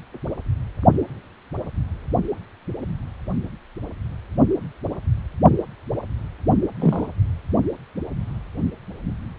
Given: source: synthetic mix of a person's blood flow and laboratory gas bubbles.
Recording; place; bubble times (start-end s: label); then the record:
Doppler ultrasound of blood flow; precordium
6.80-7.07 s: bubbles
From the record:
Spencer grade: 2 (many but less than half of the cardiac periods contain bubble signals, singularly or in groups); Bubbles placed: only in the low amplitude regions of the cardiac cycle